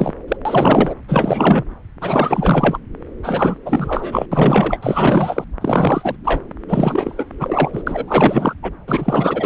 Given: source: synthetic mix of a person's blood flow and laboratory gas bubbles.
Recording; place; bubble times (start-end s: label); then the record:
Doppler ultrasound of blood flow; subclavian vein
0.00-0.14 s: bubbles
0.28-0.36 s: bubbles
0.45-0.94 s: bubbles
1.08-1.63 s: bubbles
2.01-2.77 s: bubbles
3.23-3.58 s: bubbles
3.65-4.26 s: bubbles
4.31-4.79 s: bubbles
4.82-5.44 s: bubbles
5.61-6.17 s: bubbles
6.24-6.40 s: bubbles
6.68-7.28 s: bubbles
7.39-7.83 s: bubbles
7.87-8.54 s: bubbles
8.62-8.71 s: bubbles
8.87-9.46 s: bubbles
From the record:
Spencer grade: 4 (maximum detectable bubble signal sounding continuously throughout systole and diastole of every cardiac period, and overriding the amplitude of the normal cardiac signals); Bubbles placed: anywhere in the cardiac cycle